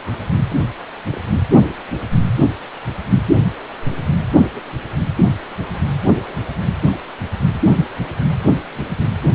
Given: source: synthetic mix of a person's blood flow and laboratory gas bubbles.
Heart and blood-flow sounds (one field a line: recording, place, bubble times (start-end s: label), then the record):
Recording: Doppler ultrasound of blood flow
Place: precordium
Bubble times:
0.04-0.41 s: bubbles
1.12-1.21 s: bubbles
4.34-4.42 s: bubbles
4.54-4.60 s: bubbles
6.19-6.45 s: bubbles
6.86-6.96 s: bubbles
From the record:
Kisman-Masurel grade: 121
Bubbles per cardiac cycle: 1 to 2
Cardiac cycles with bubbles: 10 to 50%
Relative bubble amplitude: barely perceptible (0.100 to 0.250)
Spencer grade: 2 (many but less than half of the cardiac periods contain bubble signals, singularly or in groups)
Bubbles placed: anywhere in the cardiac cycle